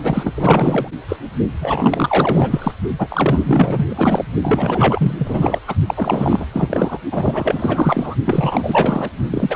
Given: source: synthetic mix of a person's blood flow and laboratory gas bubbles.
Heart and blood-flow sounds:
Doppler ultrasound of blood flow; precordium
0.03-0.88 s: bubbles
1.08-1.16 s: bubbles
1.59-2.72 s: bubbles
2.98-4.25 s: bubbles
4.42-5.60 s: bubbles
5.67-5.75 s: bubbles
5.87-6.46 s: bubbles
6.52-6.99 s: bubbles
7.12-8.15 s: bubbles
8.25-9.10 s: bubbles
9.30-9.55 s: bubbles
From the record:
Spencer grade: 4 (maximum detectable bubble signal sounding continuously throughout systole and diastole of every cardiac period, and overriding the amplitude of the normal cardiac signals); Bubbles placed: only in the low amplitude regions of the cardiac cycle

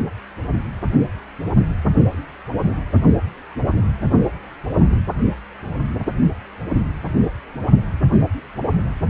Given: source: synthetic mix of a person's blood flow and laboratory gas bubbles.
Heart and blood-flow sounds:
Doppler ultrasound of blood flow; precordium
no bubbles
From the record:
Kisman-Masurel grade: 000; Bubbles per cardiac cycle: 0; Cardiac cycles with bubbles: 0%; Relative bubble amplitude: no bubbles discernible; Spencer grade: 0 (complete lack of bubble signals)

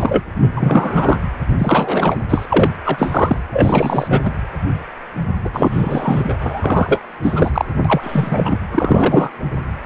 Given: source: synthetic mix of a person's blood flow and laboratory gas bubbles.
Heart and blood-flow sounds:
Doppler ultrasound of blood flow; precordium
0.00-0.24 s: bubbles
0.40-1.20 s: bubbles
1.58-2.17 s: bubbles
2.29-2.46 s: bubbles
2.50-2.69 s: bubbles
2.85-3.38 s: bubbles
3.52-4.21 s: bubbles
4.25-4.31 s: bubbles
5.44-5.50 s: bubbles
5.53-6.35 s: bubbles
6.41-7.02 s: bubbles
7.23-7.65 s: bubbles
7.85-8.59 s: bubbles
8.71-9.31 s: bubbles
From the record:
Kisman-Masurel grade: 343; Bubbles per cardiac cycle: rolling drumbeat, 9 or more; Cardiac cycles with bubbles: 100%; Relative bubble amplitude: loud (0.450 to 0.775); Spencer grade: 3 (all of the cardiac periods contain showers or single bubble signals, but not dominating or overriding the cardiac motion signals); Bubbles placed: anywhere in the cardiac cycle

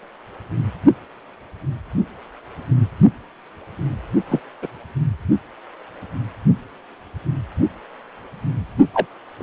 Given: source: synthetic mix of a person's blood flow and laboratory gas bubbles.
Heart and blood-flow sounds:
Doppler ultrasound of blood flow; precordium
4.29-4.40 s: bubbles
4.62-4.68 s: bubbles
8.93-9.06 s: bubbles
9.39-9.43 s: bubbles
From the record:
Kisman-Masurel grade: 123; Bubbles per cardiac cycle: 1 to 2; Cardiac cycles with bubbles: 10 to 50%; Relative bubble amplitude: loud (0.450 to 0.775); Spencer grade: 2 (many but less than half of the cardiac periods contain bubble signals, singularly or in groups); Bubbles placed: only in the low amplitude regions of the cardiac cycle

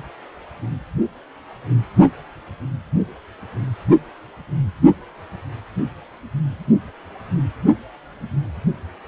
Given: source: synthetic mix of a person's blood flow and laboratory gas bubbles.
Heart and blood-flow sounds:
Doppler ultrasound of blood flow; precordium
no bubbles
From the record:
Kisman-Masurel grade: 000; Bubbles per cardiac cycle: 0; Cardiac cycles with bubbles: 0%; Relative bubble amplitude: no bubbles discernible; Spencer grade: 0 (complete lack of bubble signals)

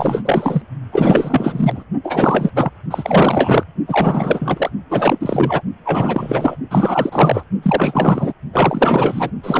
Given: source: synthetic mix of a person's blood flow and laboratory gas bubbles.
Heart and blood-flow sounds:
Doppler ultrasound of blood flow; precordium
0.00-0.22 s: bubbles
0.25-0.62 s: bubbles
0.92-1.85 s: bubbles
2.04-2.50 s: bubbles
2.55-2.70 s: bubbles
2.91-3.64 s: bubbles
3.88-4.70 s: bubbles
4.89-5.61 s: bubbles
5.84-6.56 s: bubbles
6.70-7.43 s: bubbles
7.62-8.33 s: bubbles
8.53-9.30 s: bubbles
9.43-9.60 s: bubbles
From the record:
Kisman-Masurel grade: 444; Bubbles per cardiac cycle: continuous sound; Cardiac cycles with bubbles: 100%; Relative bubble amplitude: maximal (0.775 to 0.999); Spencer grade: 4 (maximum detectable bubble signal sounding continuously throughout systole and diastole of every cardiac period, and overriding the amplitude of the normal cardiac signals); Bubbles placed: only in the low amplitude regions of the cardiac cycle

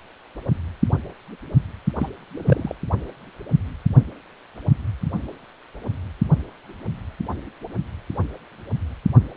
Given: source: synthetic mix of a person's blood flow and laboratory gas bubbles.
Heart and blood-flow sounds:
Doppler ultrasound of blood flow; precordium
1.99-2.08 s: bubbles
2.37-2.75 s: bubbles
From the record:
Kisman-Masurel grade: 112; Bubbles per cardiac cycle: 1 to 2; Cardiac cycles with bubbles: 1 to 10%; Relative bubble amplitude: moderate (0.250 to 0.450); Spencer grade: 1 (occasional bubble signal discernible with the cardiac motion signal, with majority of cardiac periods free of bubbles); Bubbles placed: only in the low amplitude regions of the cardiac cycle

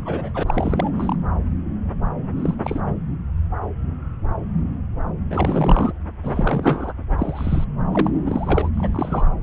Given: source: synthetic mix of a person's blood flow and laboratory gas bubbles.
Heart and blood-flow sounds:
Doppler ultrasound of blood flow; subclavian vein
0.00-0.30 s: bubbles
0.34-0.44 s: bubbles
0.46-0.91 s: bubbles
0.96-1.16 s: bubbles
2.18-2.29 s: bubbles
2.36-2.54 s: bubbles
2.62-2.81 s: bubbles
5.30-5.92 s: bubbles
6.23-6.93 s: bubbles
7.18-7.64 s: bubbles
7.91-8.10 s: bubbles
8.14-8.68 s: bubbles
8.76-9.26 s: bubbles
From the record:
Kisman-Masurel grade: 232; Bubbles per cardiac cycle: several, 3 to 8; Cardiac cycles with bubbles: 50 to 99%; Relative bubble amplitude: moderate (0.250 to 0.450); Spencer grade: 3 (all of the cardiac periods contain showers or single bubble signals, but not dominating or overriding the cardiac motion signals); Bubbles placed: anywhere in the cardiac cycle

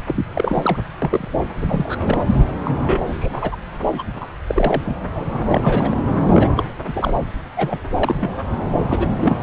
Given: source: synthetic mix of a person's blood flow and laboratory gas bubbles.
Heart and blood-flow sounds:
Doppler ultrasound of blood flow; subclavian vein
0.08-0.25 s: bubbles
0.35-0.77 s: bubbles
1.02-1.28 s: bubbles
1.61-2.24 s: bubbles
2.64-3.55 s: bubbles
3.79-4.03 s: bubbles
4.21-4.28 s: bubbles
4.46-4.95 s: bubbles
5.14-5.25 s: bubbles
5.32-5.96 s: bubbles
6.33-6.50 s: bubbles
6.57-6.65 s: bubbles
6.87-7.28 s: bubbles
7.57-7.79 s: bubbles
7.96-8.16 s: bubbles
8.20-8.46 s: bubbles
8.89-9.08 s: bubbles
9.21-9.36 s: bubbles
From the record:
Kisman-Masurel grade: 242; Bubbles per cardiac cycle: several, 3 to 8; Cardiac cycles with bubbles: 100%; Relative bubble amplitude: moderate (0.250 to 0.450); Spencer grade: 3 (all of the cardiac periods contain showers or single bubble signals, but not dominating or overriding the cardiac motion signals); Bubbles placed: anywhere in the cardiac cycle

